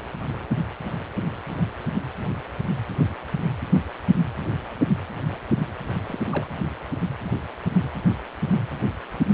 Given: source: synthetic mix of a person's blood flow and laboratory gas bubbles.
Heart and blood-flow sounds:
Doppler ultrasound of blood flow; precordium
6.08-6.20 s: bubbles
6.32-6.47 s: bubbles
From the record:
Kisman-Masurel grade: 211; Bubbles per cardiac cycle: several, 3 to 8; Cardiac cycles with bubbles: 1 to 10%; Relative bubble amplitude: barely perceptible (0.100 to 0.250); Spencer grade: 1 (occasional bubble signal discernible with the cardiac motion signal, with majority of cardiac periods free of bubbles); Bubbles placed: anywhere in the cardiac cycle

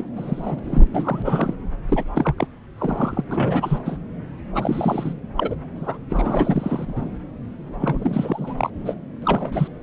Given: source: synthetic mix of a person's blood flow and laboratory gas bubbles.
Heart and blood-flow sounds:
Doppler ultrasound of blood flow; subclavian vein
0.00-0.04 s: bubbles
0.15-0.60 s: bubbles
0.64-0.88 s: bubbles
0.93-1.53 s: bubbles
1.89-2.03 s: bubbles
2.15-2.35 s: bubbles
2.38-2.46 s: bubbles
2.78-3.24 s: bubbles
3.31-3.79 s: bubbles
3.85-3.98 s: bubbles
4.54-5.14 s: bubbles
5.37-5.56 s: bubbles
5.76-5.98 s: bubbles
6.09-7.19 s: bubbles
7.79-8.54 s: bubbles
8.57-8.71 s: bubbles
8.86-8.95 s: bubbles
9.22-9.68 s: bubbles
From the record:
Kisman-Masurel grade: 343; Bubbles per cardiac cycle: rolling drumbeat, 9 or more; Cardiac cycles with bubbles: 100%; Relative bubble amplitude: loud (0.450 to 0.775); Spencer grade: 3 (all of the cardiac periods contain showers or single bubble signals, but not dominating or overriding the cardiac motion signals); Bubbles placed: anywhere in the cardiac cycle

